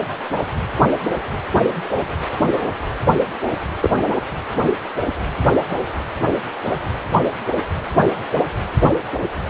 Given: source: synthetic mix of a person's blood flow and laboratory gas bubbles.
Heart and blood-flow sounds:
Doppler ultrasound of blood flow; precordium
3.80-3.90 s: bubbles
From the record:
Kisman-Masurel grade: 113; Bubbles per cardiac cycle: 1 to 2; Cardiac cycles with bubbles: 1 to 10%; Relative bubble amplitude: loud (0.450 to 0.775); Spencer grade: 1 (occasional bubble signal discernible with the cardiac motion signal, with majority of cardiac periods free of bubbles); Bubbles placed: anywhere in the cardiac cycle

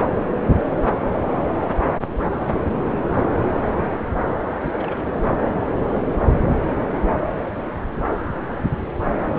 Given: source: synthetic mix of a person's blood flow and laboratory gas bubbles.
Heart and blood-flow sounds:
Doppler ultrasound of blood flow; subclavian vein
4.60-5.12 s: bubbles
5.17-5.30 s: bubbles
From the record:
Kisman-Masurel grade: 211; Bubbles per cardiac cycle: several, 3 to 8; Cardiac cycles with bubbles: 1 to 10%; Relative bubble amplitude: barely perceptible (0.100 to 0.250); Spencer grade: 1 (occasional bubble signal discernible with the cardiac motion signal, with majority of cardiac periods free of bubbles); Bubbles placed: anywhere in the cardiac cycle

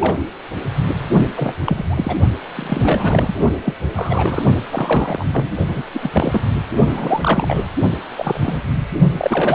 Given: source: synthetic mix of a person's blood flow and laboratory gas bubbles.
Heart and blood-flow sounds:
Doppler ultrasound of blood flow; precordium
0.00-0.23 s: bubbles
1.36-1.53 s: bubbles
1.66-1.84 s: bubbles
1.90-2.17 s: bubbles
2.55-3.35 s: bubbles
3.65-3.74 s: bubbles
3.95-4.43 s: bubbles
4.72-5.25 s: bubbles
5.32-5.53 s: bubbles
5.68-5.83 s: bubbles
5.94-6.41 s: bubbles
6.87-7.68 s: bubbles
8.17-8.62 s: bubbles
9.18-9.55 s: bubbles
From the record:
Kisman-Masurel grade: 242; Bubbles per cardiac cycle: several, 3 to 8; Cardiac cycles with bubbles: 100%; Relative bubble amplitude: moderate (0.250 to 0.450); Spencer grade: 3 (all of the cardiac periods contain showers or single bubble signals, but not dominating or overriding the cardiac motion signals); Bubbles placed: only in the low amplitude regions of the cardiac cycle

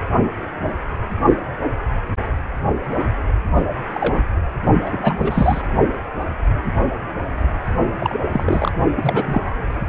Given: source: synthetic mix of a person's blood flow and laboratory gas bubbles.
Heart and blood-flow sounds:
Doppler ultrasound of blood flow; precordium
0.00-0.04 s: bubbles
3.54-3.64 s: bubbles
3.94-4.22 s: bubbles
4.86-5.62 s: bubbles
7.85-7.90 s: bubbles
8.00-8.21 s: bubbles
8.33-8.71 s: bubbles
8.97-9.42 s: bubbles
From the record:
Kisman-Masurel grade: 232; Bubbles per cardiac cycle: several, 3 to 8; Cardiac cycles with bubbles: 50 to 99%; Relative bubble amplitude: moderate (0.250 to 0.450); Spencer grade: 3 (all of the cardiac periods contain showers or single bubble signals, but not dominating or overriding the cardiac motion signals); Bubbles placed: only in the low amplitude regions of the cardiac cycle

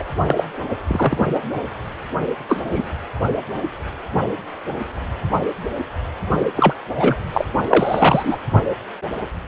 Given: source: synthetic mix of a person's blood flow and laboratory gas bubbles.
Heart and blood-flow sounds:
Doppler ultrasound of blood flow; precordium
0.00-0.02 s: bubbles
0.27-0.46 s: bubbles
0.88-1.17 s: bubbles
2.48-2.62 s: bubbles
2.67-2.90 s: bubbles
6.56-6.74 s: bubbles
6.97-7.15 s: bubbles
7.32-7.45 s: bubbles
7.70-8.38 s: bubbles
From the record:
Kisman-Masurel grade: 223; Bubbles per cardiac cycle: several, 3 to 8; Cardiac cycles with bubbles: 10 to 50%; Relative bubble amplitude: loud (0.450 to 0.775); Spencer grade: 2 (many but less than half of the cardiac periods contain bubble signals, singularly or in groups); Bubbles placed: only in the low amplitude regions of the cardiac cycle

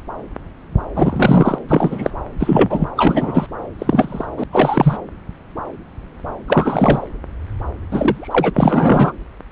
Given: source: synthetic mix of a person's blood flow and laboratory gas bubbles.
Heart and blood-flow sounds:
Doppler ultrasound of blood flow; subclavian vein
0.95-1.58 s: bubbles
1.68-2.10 s: bubbles
2.39-2.89 s: bubbles
2.96-3.46 s: bubbles
3.78-4.26 s: bubbles
4.37-4.44 s: bubbles
4.53-4.97 s: bubbles
6.47-7.07 s: bubbles
7.91-8.50 s: bubbles
8.54-9.12 s: bubbles
From the record:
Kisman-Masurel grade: 233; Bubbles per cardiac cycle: several, 3 to 8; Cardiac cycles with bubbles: 50 to 99%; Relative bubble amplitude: loud (0.450 to 0.775); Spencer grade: 3 (all of the cardiac periods contain showers or single bubble signals, but not dominating or overriding the cardiac motion signals); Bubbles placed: anywhere in the cardiac cycle

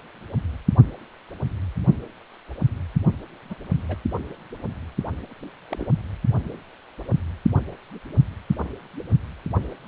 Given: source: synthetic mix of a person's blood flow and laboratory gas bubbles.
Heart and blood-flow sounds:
Doppler ultrasound of blood flow; precordium
3.50-3.55 s: bubbles
3.88-3.96 s: bubbles
5.71-5.87 s: bubbles
From the record:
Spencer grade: 2 (many but less than half of the cardiac periods contain bubble signals, singularly or in groups); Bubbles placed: only in the low amplitude regions of the cardiac cycle

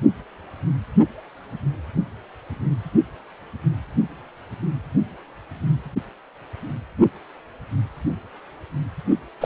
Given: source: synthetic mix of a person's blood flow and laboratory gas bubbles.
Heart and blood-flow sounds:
Doppler ultrasound of blood flow; precordium
9.40-9.45 s: bubbles
From the record:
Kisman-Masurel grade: 113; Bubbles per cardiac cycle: 1 to 2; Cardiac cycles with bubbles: 1 to 10%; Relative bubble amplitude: loud (0.450 to 0.775); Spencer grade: 1 (occasional bubble signal discernible with the cardiac motion signal, with majority of cardiac periods free of bubbles); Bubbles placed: only in the low amplitude regions of the cardiac cycle

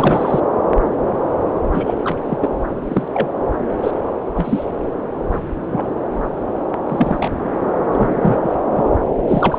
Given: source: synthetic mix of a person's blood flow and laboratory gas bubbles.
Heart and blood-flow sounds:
Doppler ultrasound of blood flow; subclavian vein
0.00-0.40 s: bubbles
1.74-1.94 s: bubbles
2.03-2.38 s: bubbles
2.41-2.52 s: bubbles
2.82-3.08 s: bubbles
3.13-3.27 s: bubbles
3.83-3.91 s: bubbles
4.33-4.65 s: bubbles
5.32-5.42 s: bubbles
5.70-5.87 s: bubbles
6.86-7.29 s: bubbles
7.91-8.54 s: bubbles
8.77-8.89 s: bubbles
9.17-9.59 s: bubbles
From the record:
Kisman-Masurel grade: 232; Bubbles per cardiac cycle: several, 3 to 8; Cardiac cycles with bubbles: 50 to 99%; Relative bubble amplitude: moderate (0.250 to 0.450); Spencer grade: 3 (all of the cardiac periods contain showers or single bubble signals, but not dominating or overriding the cardiac motion signals); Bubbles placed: anywhere in the cardiac cycle

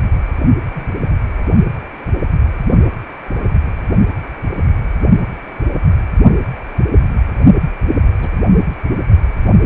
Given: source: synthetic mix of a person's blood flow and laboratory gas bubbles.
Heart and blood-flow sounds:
Doppler ultrasound of blood flow; precordium
0.75-0.91 s: bubbles
8.21-8.29 s: bubbles
From the record:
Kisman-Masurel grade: 122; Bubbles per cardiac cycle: 1 to 2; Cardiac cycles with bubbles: 10 to 50%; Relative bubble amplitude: moderate (0.250 to 0.450); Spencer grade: 2 (many but less than half of the cardiac periods contain bubble signals, singularly or in groups); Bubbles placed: only in the low amplitude regions of the cardiac cycle

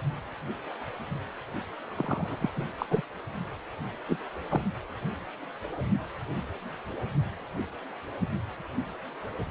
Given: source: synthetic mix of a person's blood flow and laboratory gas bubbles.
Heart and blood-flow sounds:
Doppler ultrasound of blood flow; precordium
1.98-2.37 s: bubbles
2.40-2.50 s: bubbles
2.56-2.64 s: bubbles
2.78-2.86 s: bubbles
2.90-3.01 s: bubbles
4.08-4.17 s: bubbles
4.50-4.61 s: bubbles
From the record:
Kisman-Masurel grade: 221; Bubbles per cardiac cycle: several, 3 to 8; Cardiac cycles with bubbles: 10 to 50%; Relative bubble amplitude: barely perceptible (0.100 to 0.250); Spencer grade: 2 (many but less than half of the cardiac periods contain bubble signals, singularly or in groups); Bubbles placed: anywhere in the cardiac cycle

